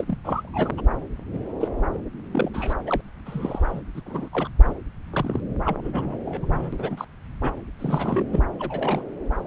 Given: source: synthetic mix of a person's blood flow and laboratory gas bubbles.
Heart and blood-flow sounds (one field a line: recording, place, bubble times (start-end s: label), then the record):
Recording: Doppler ultrasound of blood flow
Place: subclavian vein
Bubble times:
0.00-0.04 s: bubbles
0.07-0.17 s: bubbles
0.24-0.81 s: bubbles
1.32-1.39 s: bubbles
1.60-1.68 s: bubbles
1.93-1.98 s: bubbles
2.32-2.50 s: bubbles
2.54-2.73 s: bubbles
2.86-3.01 s: bubbles
3.25-3.81 s: bubbles
3.95-4.01 s: bubbles
4.06-4.29 s: bubbles
4.33-4.48 s: bubbles
4.65-4.74 s: bubbles
5.12-5.40 s: bubbles
5.65-6.19 s: bubbles
6.25-7.05 s: bubbles
7.42-7.51 s: bubbles
7.79-8.24 s: bubbles
8.30-8.43 s: bubbles
8.59-9.02 s: bubbles
From the record:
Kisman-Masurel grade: 242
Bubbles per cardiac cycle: several, 3 to 8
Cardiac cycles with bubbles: 100%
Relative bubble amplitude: moderate (0.250 to 0.450)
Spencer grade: 3 (all of the cardiac periods contain showers or single bubble signals, but not dominating or overriding the cardiac motion signals)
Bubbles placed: anywhere in the cardiac cycle